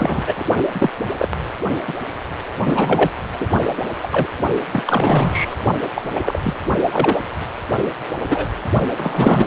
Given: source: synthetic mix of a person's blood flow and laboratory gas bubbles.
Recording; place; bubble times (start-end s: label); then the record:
Doppler ultrasound of blood flow; precordium
0.00-0.44 s: bubbles
0.72-0.90 s: bubbles
1.18-1.28 s: bubbles
1.87-1.92 s: bubbles
2.65-3.10 s: bubbles
3.39-3.47 s: bubbles
4.02-4.08 s: bubbles
4.12-4.28 s: bubbles
4.72-4.83 s: bubbles
4.86-5.54 s: bubbles
5.95-6.02 s: bubbles
6.14-6.38 s: bubbles
6.42-6.54 s: bubbles
6.91-7.17 s: bubbles
8.28-8.52 s: bubbles
8.97-9.47 s: bubbles
From the record:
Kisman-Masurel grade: 243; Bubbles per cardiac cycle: several, 3 to 8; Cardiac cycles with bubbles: 100%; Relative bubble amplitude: loud (0.450 to 0.775); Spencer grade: 3 (all of the cardiac periods contain showers or single bubble signals, but not dominating or overriding the cardiac motion signals); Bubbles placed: only in the low amplitude regions of the cardiac cycle